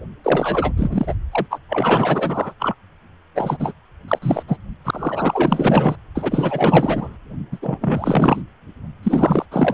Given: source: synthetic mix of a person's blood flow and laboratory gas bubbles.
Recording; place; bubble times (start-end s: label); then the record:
Doppler ultrasound of blood flow; precordium
0.23-0.73 s: bubbles
0.76-1.15 s: bubbles
1.31-1.46 s: bubbles
1.50-1.58 s: bubbles
1.69-2.53 s: bubbles
2.59-2.74 s: bubbles
3.34-3.72 s: bubbles
4.08-4.18 s: bubbles
4.22-4.43 s: bubbles
4.47-4.57 s: bubbles
4.84-5.96 s: bubbles
6.14-7.17 s: bubbles
7.51-7.58 s: bubbles
7.62-7.78 s: bubbles
7.81-8.42 s: bubbles
9.03-9.46 s: bubbles
9.51-9.74 s: bubbles
From the record:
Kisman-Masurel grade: 444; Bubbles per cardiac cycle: continuous sound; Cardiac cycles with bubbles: 100%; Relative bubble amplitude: maximal (0.775 to 0.999); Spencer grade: 4 (maximum detectable bubble signal sounding continuously throughout systole and diastole of every cardiac period, and overriding the amplitude of the normal cardiac signals); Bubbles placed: anywhere in the cardiac cycle